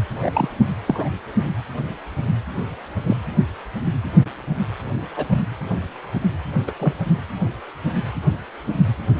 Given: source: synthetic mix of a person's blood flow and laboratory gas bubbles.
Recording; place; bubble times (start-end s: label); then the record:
Doppler ultrasound of blood flow; precordium
0.09-0.49 s: bubbles
0.86-1.08 s: bubbles
3.06-3.17 s: bubbles
5.15-5.27 s: bubbles
5.30-5.41 s: bubbles
6.67-6.71 s: bubbles
6.79-6.93 s: bubbles
From the record:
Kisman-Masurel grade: 122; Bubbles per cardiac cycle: 1 to 2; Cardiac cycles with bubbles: 10 to 50%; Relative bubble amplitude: moderate (0.250 to 0.450); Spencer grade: 2 (many but less than half of the cardiac periods contain bubble signals, singularly or in groups); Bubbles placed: anywhere in the cardiac cycle